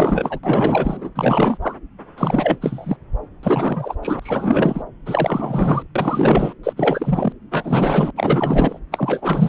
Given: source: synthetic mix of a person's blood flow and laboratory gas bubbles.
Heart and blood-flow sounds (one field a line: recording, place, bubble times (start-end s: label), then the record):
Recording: Doppler ultrasound of blood flow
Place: subclavian vein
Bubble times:
0.00-0.39 s: bubbles
0.43-1.10 s: bubbles
1.16-1.57 s: bubbles
1.61-1.76 s: bubbles
2.18-2.58 s: bubbles
2.61-2.97 s: bubbles
3.43-3.95 s: bubbles
4.03-4.83 s: bubbles
5.06-5.84 s: bubbles
5.96-6.54 s: bubbles
6.63-6.73 s: bubbles
6.76-7.33 s: bubbles
7.51-8.10 s: bubbles
8.16-8.79 s: bubbles
8.91-9.49 s: bubbles
From the record:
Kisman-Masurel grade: 444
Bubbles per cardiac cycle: continuous sound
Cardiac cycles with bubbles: 100%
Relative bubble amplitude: maximal (0.775 to 0.999)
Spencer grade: 4 (maximum detectable bubble signal sounding continuously throughout systole and diastole of every cardiac period, and overriding the amplitude of the normal cardiac signals)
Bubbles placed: anywhere in the cardiac cycle